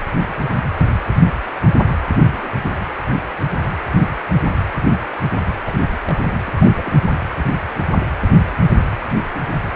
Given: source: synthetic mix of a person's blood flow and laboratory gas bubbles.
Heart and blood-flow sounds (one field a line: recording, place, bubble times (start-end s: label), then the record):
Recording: Doppler ultrasound of blood flow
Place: precordium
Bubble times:
2.25-2.48 s: bubbles
5.65-5.77 s: bubbles
5.92-5.96 s: bubbles
6.07-6.28 s: bubbles
6.30-6.38 s: bubbles
6.46-6.71 s: bubbles
6.76-7.04 s: bubbles
7.14-7.18 s: bubbles
From the record:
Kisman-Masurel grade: 221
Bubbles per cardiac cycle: several, 3 to 8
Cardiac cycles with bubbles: 10 to 50%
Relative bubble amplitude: barely perceptible (0.100 to 0.250)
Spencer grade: 2 (many but less than half of the cardiac periods contain bubble signals, singularly or in groups)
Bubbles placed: anywhere in the cardiac cycle